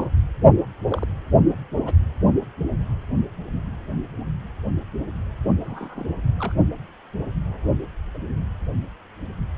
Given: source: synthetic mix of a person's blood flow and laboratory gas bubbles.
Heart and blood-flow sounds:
Doppler ultrasound of blood flow; precordium
0.00-0.03 s: bubbles
0.90-1.07 s: bubbles
1.85-1.93 s: bubbles
5.64-6.04 s: bubbles
6.39-6.52 s: bubbles
8.14-8.18 s: bubbles
From the record:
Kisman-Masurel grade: 121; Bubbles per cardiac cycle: 1 to 2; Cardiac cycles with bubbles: 10 to 50%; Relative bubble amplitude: barely perceptible (0.100 to 0.250); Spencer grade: 2 (many but less than half of the cardiac periods contain bubble signals, singularly or in groups); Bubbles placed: only in the low amplitude regions of the cardiac cycle

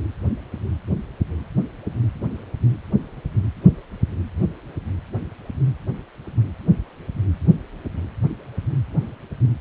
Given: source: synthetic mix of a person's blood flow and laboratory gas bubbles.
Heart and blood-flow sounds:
Doppler ultrasound of blood flow; precordium
no bubbles
From the record:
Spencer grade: 0 (complete lack of bubble signals)

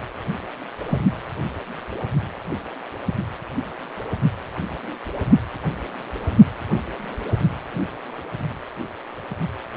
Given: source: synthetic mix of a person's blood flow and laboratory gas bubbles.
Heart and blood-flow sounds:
Doppler ultrasound of blood flow; precordium
0.88-0.98 s: bubbles
From the record:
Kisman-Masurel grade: 112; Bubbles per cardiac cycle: 1 to 2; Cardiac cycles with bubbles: 1 to 10%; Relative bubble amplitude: moderate (0.250 to 0.450); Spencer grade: 1 (occasional bubble signal discernible with the cardiac motion signal, with majority of cardiac periods free of bubbles); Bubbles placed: only in the low amplitude regions of the cardiac cycle

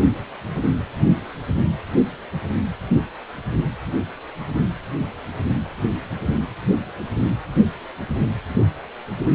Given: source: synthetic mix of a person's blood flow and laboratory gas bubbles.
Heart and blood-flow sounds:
Doppler ultrasound of blood flow; precordium
no bubbles
From the record:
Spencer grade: 0 (complete lack of bubble signals)

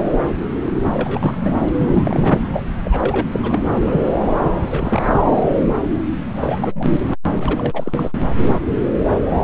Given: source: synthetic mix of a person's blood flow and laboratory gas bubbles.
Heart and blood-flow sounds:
Doppler ultrasound of blood flow; subclavian vein
0.84-1.54 s: bubbles
1.73-2.42 s: bubbles
2.51-2.61 s: bubbles
2.84-3.27 s: bubbles
3.31-3.40 s: bubbles
3.42-4.13 s: bubbles
4.40-5.42 s: bubbles
6.41-7.00 s: bubbles
7.30-8.12 s: bubbles
From the record:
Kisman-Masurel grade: 332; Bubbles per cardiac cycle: rolling drumbeat, 9 or more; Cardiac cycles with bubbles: 50 to 99%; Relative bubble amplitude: moderate (0.250 to 0.450); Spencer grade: 3 (all of the cardiac periods contain showers or single bubble signals, but not dominating or overriding the cardiac motion signals); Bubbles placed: anywhere in the cardiac cycle

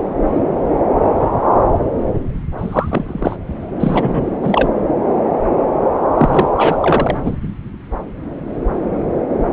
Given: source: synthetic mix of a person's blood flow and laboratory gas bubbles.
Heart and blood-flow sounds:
Doppler ultrasound of blood flow; subclavian vein
2.58-3.37 s: bubbles
3.79-4.30 s: bubbles
4.42-4.69 s: bubbles
6.17-6.48 s: bubbles
6.57-6.78 s: bubbles
6.80-7.17 s: bubbles
7.24-7.37 s: bubbles
From the record:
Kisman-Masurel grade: 223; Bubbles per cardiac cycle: several, 3 to 8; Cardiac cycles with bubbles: 10 to 50%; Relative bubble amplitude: loud (0.450 to 0.775); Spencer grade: 2 (many but less than half of the cardiac periods contain bubble signals, singularly or in groups); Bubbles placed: anywhere in the cardiac cycle

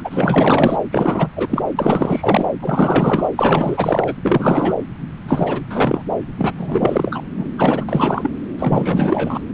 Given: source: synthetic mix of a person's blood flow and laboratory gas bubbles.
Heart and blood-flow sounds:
Doppler ultrasound of blood flow; subclavian vein
0.00-0.77 s: bubbles
0.91-1.33 s: bubbles
1.36-1.63 s: bubbles
1.75-2.52 s: bubbles
2.62-3.29 s: bubbles
3.36-4.14 s: bubbles
4.22-4.73 s: bubbles
5.26-5.62 s: bubbles
5.69-6.03 s: bubbles
6.37-6.52 s: bubbles
6.58-7.22 s: bubbles
7.38-7.48 s: bubbles
7.58-7.85 s: bubbles
7.88-8.31 s: bubbles
8.58-9.42 s: bubbles
From the record:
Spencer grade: 4 (maximum detectable bubble signal sounding continuously throughout systole and diastole of every cardiac period, and overriding the amplitude of the normal cardiac signals); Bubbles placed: anywhere in the cardiac cycle

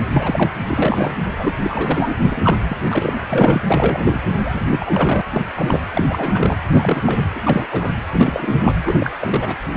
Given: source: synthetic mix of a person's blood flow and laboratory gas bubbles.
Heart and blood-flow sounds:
Doppler ultrasound of blood flow; precordium
0.10-0.51 s: bubbles
0.67-1.17 s: bubbles
1.38-1.55 s: bubbles
1.62-2.15 s: bubbles
2.31-2.58 s: bubbles
2.69-2.77 s: bubbles
2.89-3.26 s: bubbles
3.29-3.62 s: bubbles
3.68-4.20 s: bubbles
4.43-4.60 s: bubbles
4.71-5.21 s: bubbles
5.32-5.46 s: bubbles
5.55-5.80 s: bubbles
5.95-6.04 s: bubbles
6.09-6.57 s: bubbles
6.69-7.02 s: bubbles
7.05-7.26 s: bubbles
7.35-7.40 s: bubbles
7.45-7.94 s: bubbles
8.12-8.59 s: bubbles
8.62-8.75 s: bubbles
8.84-9.12 s: bubbles
9.20-9.55 s: bubbles
9.72-9.76 s: bubbles
From the record:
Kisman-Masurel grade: 343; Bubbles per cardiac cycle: rolling drumbeat, 9 or more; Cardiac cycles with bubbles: 100%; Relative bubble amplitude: loud (0.450 to 0.775); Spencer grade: 3 (all of the cardiac periods contain showers or single bubble signals, but not dominating or overriding the cardiac motion signals); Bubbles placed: anywhere in the cardiac cycle

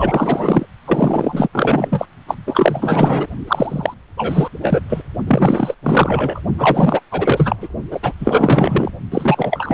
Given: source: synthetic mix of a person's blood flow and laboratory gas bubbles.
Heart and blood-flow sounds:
Doppler ultrasound of blood flow; precordium
0.00-0.67 s: bubbles
0.85-1.48 s: bubbles
1.52-2.06 s: bubbles
2.27-2.36 s: bubbles
2.46-3.26 s: bubbles
3.47-3.94 s: bubbles
4.17-4.49 s: bubbles
4.62-4.80 s: bubbles
4.89-5.02 s: bubbles
5.27-5.75 s: bubbles
5.83-6.41 s: bubbles
6.58-7.00 s: bubbles
7.11-7.56 s: bubbles
7.60-7.68 s: bubbles
7.91-8.00 s: bubbles
8.03-8.13 s: bubbles
8.20-8.92 s: bubbles
9.12-9.74 s: bubbles
From the record:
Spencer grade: 4 (maximum detectable bubble signal sounding continuously throughout systole and diastole of every cardiac period, and overriding the amplitude of the normal cardiac signals); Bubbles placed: only in the low amplitude regions of the cardiac cycle

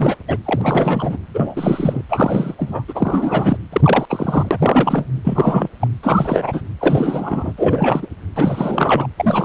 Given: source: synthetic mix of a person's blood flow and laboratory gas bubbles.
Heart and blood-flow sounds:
Doppler ultrasound of blood flow; precordium
0.00-0.16 s: bubbles
0.27-0.38 s: bubbles
0.45-1.17 s: bubbles
1.34-2.02 s: bubbles
2.09-2.54 s: bubbles
2.58-2.83 s: bubbles
2.88-3.57 s: bubbles
3.73-4.05 s: bubbles
4.10-5.06 s: bubbles
5.23-5.69 s: bubbles
5.80-5.88 s: bubbles
6.03-6.62 s: bubbles
6.79-7.53 s: bubbles
7.57-8.06 s: bubbles
8.36-9.07 s: bubbles
9.17-9.45 s: bubbles
From the record:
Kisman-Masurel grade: 343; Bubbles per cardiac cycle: rolling drumbeat, 9 or more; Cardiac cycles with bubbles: 100%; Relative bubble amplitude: loud (0.450 to 0.775); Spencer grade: 3 (all of the cardiac periods contain showers or single bubble signals, but not dominating or overriding the cardiac motion signals); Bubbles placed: anywhere in the cardiac cycle

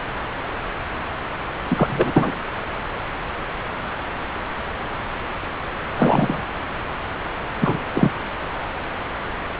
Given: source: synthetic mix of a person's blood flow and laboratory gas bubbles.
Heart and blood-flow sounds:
Doppler ultrasound of blood flow; subclavian vein
1.69-2.31 s: bubbles
5.97-6.44 s: bubbles
7.60-7.77 s: bubbles
7.94-8.12 s: bubbles
From the record:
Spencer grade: 2 (many but less than half of the cardiac periods contain bubble signals, singularly or in groups); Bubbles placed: anywhere in the cardiac cycle

